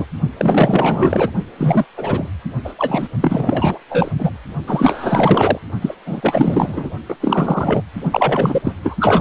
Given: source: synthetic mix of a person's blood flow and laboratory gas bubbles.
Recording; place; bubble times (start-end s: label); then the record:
Doppler ultrasound of blood flow; precordium
0.00-0.07 s: bubbles
0.38-1.31 s: bubbles
1.58-1.85 s: bubbles
1.97-2.29 s: bubbles
2.65-2.73 s: bubbles
2.78-3.08 s: bubbles
3.21-3.78 s: bubbles
3.89-4.11 s: bubbles
4.17-4.37 s: bubbles
4.67-5.59 s: bubbles
5.81-5.94 s: bubbles
6.05-6.89 s: bubbles
7.08-7.16 s: bubbles
7.21-7.84 s: bubbles
8.12-8.74 s: bubbles
8.83-9.21 s: bubbles
From the record:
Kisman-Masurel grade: 444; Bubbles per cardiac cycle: continuous sound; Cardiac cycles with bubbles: 100%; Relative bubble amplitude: maximal (0.775 to 0.999); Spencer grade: 4 (maximum detectable bubble signal sounding continuously throughout systole and diastole of every cardiac period, and overriding the amplitude of the normal cardiac signals); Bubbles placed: only in the low amplitude regions of the cardiac cycle